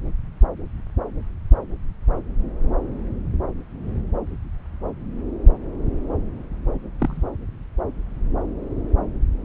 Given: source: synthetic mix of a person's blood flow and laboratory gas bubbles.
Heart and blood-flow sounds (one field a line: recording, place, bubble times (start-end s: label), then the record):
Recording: Doppler ultrasound of blood flow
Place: subclavian vein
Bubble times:
7.00-7.22 s: bubbles
From the record:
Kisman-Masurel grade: 112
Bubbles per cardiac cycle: 1 to 2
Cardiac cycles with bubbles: 1 to 10%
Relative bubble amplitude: moderate (0.250 to 0.450)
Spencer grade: 1 (occasional bubble signal discernible with the cardiac motion signal, with majority of cardiac periods free of bubbles)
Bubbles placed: anywhere in the cardiac cycle